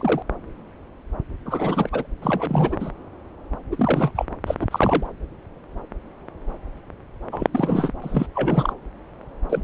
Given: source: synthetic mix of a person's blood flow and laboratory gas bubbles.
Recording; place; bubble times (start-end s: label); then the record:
Doppler ultrasound of blood flow; subclavian vein
0.00-0.22 s: bubbles
1.45-1.90 s: bubbles
1.92-2.06 s: bubbles
2.22-2.77 s: bubbles
2.80-2.91 s: bubbles
3.71-4.11 s: bubbles
4.15-4.25 s: bubbles
4.46-4.54 s: bubbles
4.59-4.67 s: bubbles
4.71-5.07 s: bubbles
7.32-7.47 s: bubbles
7.52-7.93 s: bubbles
8.01-8.26 s: bubbles
8.34-8.73 s: bubbles
9.49-9.64 s: bubbles
From the record:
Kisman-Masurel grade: 332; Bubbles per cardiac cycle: rolling drumbeat, 9 or more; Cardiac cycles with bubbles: 50 to 99%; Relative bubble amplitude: moderate (0.250 to 0.450); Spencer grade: 3 (all of the cardiac periods contain showers or single bubble signals, but not dominating or overriding the cardiac motion signals); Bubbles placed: anywhere in the cardiac cycle